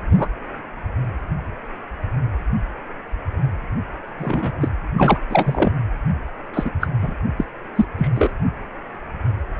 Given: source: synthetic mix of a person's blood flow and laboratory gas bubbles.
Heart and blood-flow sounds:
Doppler ultrasound of blood flow; precordium
0.16-0.28 s: bubbles
4.19-4.53 s: bubbles
4.61-4.69 s: bubbles
4.98-5.18 s: bubbles
5.30-5.71 s: bubbles
6.54-6.72 s: bubbles
6.81-6.88 s: bubbles
7.02-7.14 s: bubbles
7.37-7.45 s: bubbles
7.75-7.86 s: bubbles
7.98-8.11 s: bubbles
8.14-8.31 s: bubbles
From the record:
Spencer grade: 2 (many but less than half of the cardiac periods contain bubble signals, singularly or in groups); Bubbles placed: anywhere in the cardiac cycle

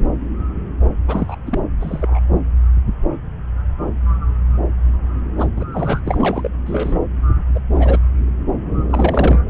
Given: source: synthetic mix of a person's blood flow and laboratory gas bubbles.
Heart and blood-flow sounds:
Doppler ultrasound of blood flow; subclavian vein
1.07-1.36 s: bubbles
1.47-1.60 s: bubbles
1.80-2.19 s: bubbles
5.38-5.47 s: bubbles
5.56-5.64 s: bubbles
5.73-6.00 s: bubbles
6.05-6.50 s: bubbles
6.67-6.98 s: bubbles
7.54-7.60 s: bubbles
7.74-7.99 s: bubbles
8.90-9.40 s: bubbles
From the record:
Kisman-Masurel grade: 222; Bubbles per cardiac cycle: several, 3 to 8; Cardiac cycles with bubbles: 10 to 50%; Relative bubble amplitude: moderate (0.250 to 0.450); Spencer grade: 2 (many but less than half of the cardiac periods contain bubble signals, singularly or in groups); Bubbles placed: anywhere in the cardiac cycle

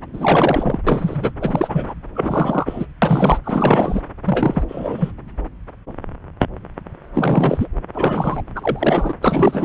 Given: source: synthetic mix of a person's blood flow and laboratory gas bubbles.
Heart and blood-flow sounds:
Doppler ultrasound of blood flow; subclavian vein
0.13-0.81 s: bubbles
0.86-1.32 s: bubbles
1.41-1.94 s: bubbles
2.15-2.86 s: bubbles
3.02-3.38 s: bubbles
3.44-4.01 s: bubbles
4.24-4.63 s: bubbles
4.67-5.12 s: bubbles
7.14-7.67 s: bubbles
7.94-8.42 s: bubbles
8.56-9.14 s: bubbles
9.22-9.65 s: bubbles
From the record:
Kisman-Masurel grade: 333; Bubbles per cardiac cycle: rolling drumbeat, 9 or more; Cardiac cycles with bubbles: 50 to 99%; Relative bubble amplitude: loud (0.450 to 0.775); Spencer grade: 3 (all of the cardiac periods contain showers or single bubble signals, but not dominating or overriding the cardiac motion signals); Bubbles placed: anywhere in the cardiac cycle

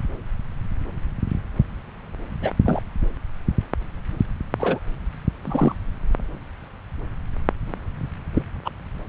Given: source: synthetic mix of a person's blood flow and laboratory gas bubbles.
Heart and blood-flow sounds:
Doppler ultrasound of blood flow; subclavian vein
2.42-2.51 s: bubbles
2.65-2.81 s: bubbles
4.59-4.79 s: bubbles
5.44-5.75 s: bubbles
8.35-8.42 s: bubbles
8.65-8.71 s: bubbles
From the record:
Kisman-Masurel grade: 122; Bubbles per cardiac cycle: 1 to 2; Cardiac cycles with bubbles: 10 to 50%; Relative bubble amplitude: moderate (0.250 to 0.450); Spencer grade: 2 (many but less than half of the cardiac periods contain bubble signals, singularly or in groups); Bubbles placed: anywhere in the cardiac cycle

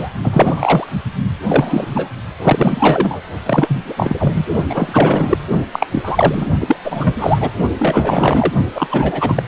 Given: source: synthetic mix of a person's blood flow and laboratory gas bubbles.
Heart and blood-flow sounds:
Doppler ultrasound of blood flow; precordium
0.00-0.10 s: bubbles
0.23-0.87 s: bubbles
1.48-2.10 s: bubbles
2.37-3.21 s: bubbles
3.46-3.93 s: bubbles
3.97-4.46 s: bubbles
4.69-5.38 s: bubbles
5.72-5.86 s: bubbles
5.90-6.46 s: bubbles
6.60-6.76 s: bubbles
6.84-7.51 s: bubbles
7.79-8.53 s: bubbles
8.74-8.88 s: bubbles
8.90-9.42 s: bubbles
From the record:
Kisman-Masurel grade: 343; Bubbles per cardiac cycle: rolling drumbeat, 9 or more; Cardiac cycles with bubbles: 100%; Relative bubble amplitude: loud (0.450 to 0.775); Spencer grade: 3 (all of the cardiac periods contain showers or single bubble signals, but not dominating or overriding the cardiac motion signals); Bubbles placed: only in the low amplitude regions of the cardiac cycle

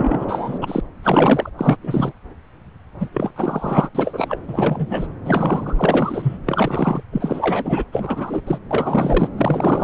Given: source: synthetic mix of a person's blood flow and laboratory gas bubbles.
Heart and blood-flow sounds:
Doppler ultrasound of blood flow; subclavian vein
0.00-0.25 s: bubbles
0.28-0.58 s: bubbles
0.61-0.80 s: bubbles
1.02-1.49 s: bubbles
1.57-1.76 s: bubbles
1.83-2.12 s: bubbles
2.99-3.09 s: bubbles
3.14-3.34 s: bubbles
3.36-3.90 s: bubbles
3.95-4.39 s: bubbles
4.48-4.86 s: bubbles
4.89-5.08 s: bubbles
5.25-6.37 s: bubbles
6.46-7.03 s: bubbles
7.12-7.85 s: bubbles
7.92-8.42 s: bubbles
8.46-8.59 s: bubbles
8.71-9.28 s: bubbles
9.37-9.84 s: bubbles
From the record:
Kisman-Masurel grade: 333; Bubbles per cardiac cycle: rolling drumbeat, 9 or more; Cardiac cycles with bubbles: 50 to 99%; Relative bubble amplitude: loud (0.450 to 0.775); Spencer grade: 3 (all of the cardiac periods contain showers or single bubble signals, but not dominating or overriding the cardiac motion signals); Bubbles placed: anywhere in the cardiac cycle

